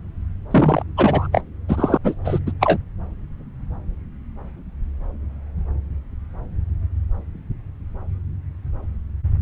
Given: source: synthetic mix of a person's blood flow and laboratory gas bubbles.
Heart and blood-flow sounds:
Doppler ultrasound of blood flow; subclavian vein
0.51-0.82 s: bubbles
0.96-1.28 s: bubbles
1.32-1.43 s: bubbles
1.69-1.98 s: bubbles
2.04-2.14 s: bubbles
2.25-2.39 s: bubbles
2.46-2.52 s: bubbles
2.60-2.77 s: bubbles
From the record:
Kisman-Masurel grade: 223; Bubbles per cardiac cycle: several, 3 to 8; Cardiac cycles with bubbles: 10 to 50%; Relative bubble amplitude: loud (0.450 to 0.775); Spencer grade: 2 (many but less than half of the cardiac periods contain bubble signals, singularly or in groups); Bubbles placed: anywhere in the cardiac cycle

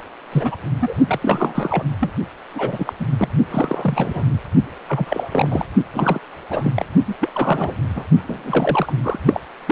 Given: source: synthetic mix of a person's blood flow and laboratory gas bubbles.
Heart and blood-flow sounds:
Doppler ultrasound of blood flow; precordium
0.00-0.04 s: bubbles
0.32-0.55 s: bubbles
0.80-0.94 s: bubbles
1.07-1.19 s: bubbles
1.21-1.84 s: bubbles
2.00-2.12 s: bubbles
2.54-2.93 s: bubbles
3.00-3.06 s: bubbles
3.17-3.28 s: bubbles
3.50-4.39 s: bubbles
4.89-5.65 s: bubbles
5.94-6.20 s: bubbles
6.50-6.72 s: bubbles
6.76-6.86 s: bubbles
7.06-7.16 s: bubbles
7.20-7.29 s: bubbles
7.34-7.75 s: bubbles
7.95-8.04 s: bubbles
8.28-8.93 s: bubbles
9.03-9.19 s: bubbles
9.25-9.40 s: bubbles
9.67-9.72 s: bubbles
From the record:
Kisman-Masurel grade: 342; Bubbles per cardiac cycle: rolling drumbeat, 9 or more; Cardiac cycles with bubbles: 100%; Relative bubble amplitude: moderate (0.250 to 0.450); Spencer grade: 3 (all of the cardiac periods contain showers or single bubble signals, but not dominating or overriding the cardiac motion signals); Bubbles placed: only in the low amplitude regions of the cardiac cycle

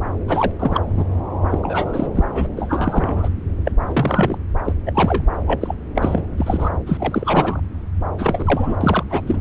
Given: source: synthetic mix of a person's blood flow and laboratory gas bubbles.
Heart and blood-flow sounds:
Doppler ultrasound of blood flow; subclavian vein
0.28-0.52 s: bubbles
0.59-0.85 s: bubbles
0.94-1.04 s: bubbles
1.50-1.60 s: bubbles
1.63-2.07 s: bubbles
2.15-2.23 s: bubbles
2.33-2.47 s: bubbles
2.56-3.29 s: bubbles
3.65-3.71 s: bubbles
3.87-4.38 s: bubbles
4.65-4.73 s: bubbles
4.86-4.92 s: bubbles
4.95-5.23 s: bubbles
5.46-5.75 s: bubbles
5.95-6.22 s: bubbles
6.38-6.70 s: bubbles
6.86-7.60 s: bubbles
8.18-8.76 s: bubbles
8.81-9.03 s: bubbles
9.09-9.41 s: bubbles
From the record:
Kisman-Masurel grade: 243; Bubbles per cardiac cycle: several, 3 to 8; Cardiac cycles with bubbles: 100%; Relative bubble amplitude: loud (0.450 to 0.775); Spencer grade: 3 (all of the cardiac periods contain showers or single bubble signals, but not dominating or overriding the cardiac motion signals); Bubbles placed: anywhere in the cardiac cycle

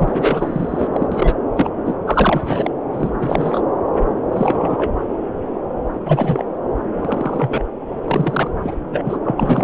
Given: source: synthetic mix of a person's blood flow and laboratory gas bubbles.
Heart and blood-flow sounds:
Doppler ultrasound of blood flow; subclavian vein
0.00-0.88 s: bubbles
0.92-1.07 s: bubbles
1.11-1.34 s: bubbles
1.55-1.70 s: bubbles
1.85-1.96 s: bubbles
2.07-2.71 s: bubbles
2.92-3.12 s: bubbles
3.20-3.60 s: bubbles
4.31-4.92 s: bubbles
6.05-6.44 s: bubbles
6.96-7.67 s: bubbles
8.04-8.51 s: bubbles
8.62-8.75 s: bubbles
8.91-9.18 s: bubbles
9.24-9.64 s: bubbles
From the record:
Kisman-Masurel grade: 332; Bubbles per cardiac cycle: rolling drumbeat, 9 or more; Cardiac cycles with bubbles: 50 to 99%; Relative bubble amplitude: moderate (0.250 to 0.450); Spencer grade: 3 (all of the cardiac periods contain showers or single bubble signals, but not dominating or overriding the cardiac motion signals); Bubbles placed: anywhere in the cardiac cycle

